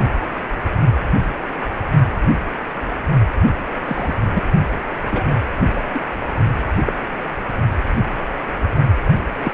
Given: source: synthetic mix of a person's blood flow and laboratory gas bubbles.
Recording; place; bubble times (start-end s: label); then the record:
Doppler ultrasound of blood flow; precordium
3.85-4.14 s: bubbles
4.34-4.45 s: bubbles
5.10-5.35 s: bubbles
5.75-5.80 s: bubbles
5.93-6.00 s: bubbles
6.86-6.93 s: bubbles
9.44-9.53 s: bubbles
From the record:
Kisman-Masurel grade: 122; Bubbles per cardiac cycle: 1 to 2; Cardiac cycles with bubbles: 10 to 50%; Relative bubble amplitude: moderate (0.250 to 0.450); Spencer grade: 2 (many but less than half of the cardiac periods contain bubble signals, singularly or in groups); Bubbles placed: anywhere in the cardiac cycle